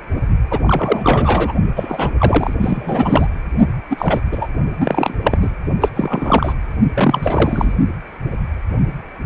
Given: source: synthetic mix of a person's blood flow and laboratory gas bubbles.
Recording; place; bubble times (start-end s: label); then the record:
Doppler ultrasound of blood flow; precordium
0.50-0.59 s: bubbles
0.62-1.53 s: bubbles
1.76-2.11 s: bubbles
2.18-2.54 s: bubbles
2.61-3.27 s: bubbles
3.90-4.20 s: bubbles
4.32-4.48 s: bubbles
4.80-5.14 s: bubbles
5.23-5.50 s: bubbles
5.81-5.89 s: bubbles
5.96-6.54 s: bubbles
6.95-7.76 s: bubbles
From the record:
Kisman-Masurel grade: 333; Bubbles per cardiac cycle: rolling drumbeat, 9 or more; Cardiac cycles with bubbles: 50 to 99%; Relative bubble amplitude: loud (0.450 to 0.775); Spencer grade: 3 (all of the cardiac periods contain showers or single bubble signals, but not dominating or overriding the cardiac motion signals); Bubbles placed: only in the low amplitude regions of the cardiac cycle